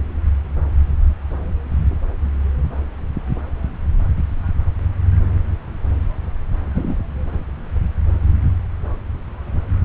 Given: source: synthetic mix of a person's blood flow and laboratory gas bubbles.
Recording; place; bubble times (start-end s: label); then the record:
Doppler ultrasound of blood flow; subclavian vein
6.75-6.99 s: bubbles
From the record:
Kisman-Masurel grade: 112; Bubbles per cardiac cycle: 1 to 2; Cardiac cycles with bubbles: 1 to 10%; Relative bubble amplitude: moderate (0.250 to 0.450); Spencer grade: 1 (occasional bubble signal discernible with the cardiac motion signal, with majority of cardiac periods free of bubbles); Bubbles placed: anywhere in the cardiac cycle